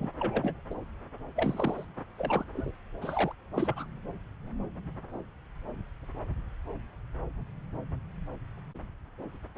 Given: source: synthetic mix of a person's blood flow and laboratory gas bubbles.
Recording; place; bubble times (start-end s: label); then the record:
Doppler ultrasound of blood flow; subclavian vein
0.00-0.09 s: bubbles
0.20-0.54 s: bubbles
0.70-0.74 s: bubbles
1.36-1.85 s: bubbles
2.18-2.44 s: bubbles
2.53-2.71 s: bubbles
3.01-3.32 s: bubbles
3.53-3.86 s: bubbles
From the record:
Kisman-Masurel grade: 221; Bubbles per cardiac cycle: several, 3 to 8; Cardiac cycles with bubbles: 10 to 50%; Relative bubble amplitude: barely perceptible (0.100 to 0.250); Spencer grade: 2 (many but less than half of the cardiac periods contain bubble signals, singularly or in groups); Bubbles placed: anywhere in the cardiac cycle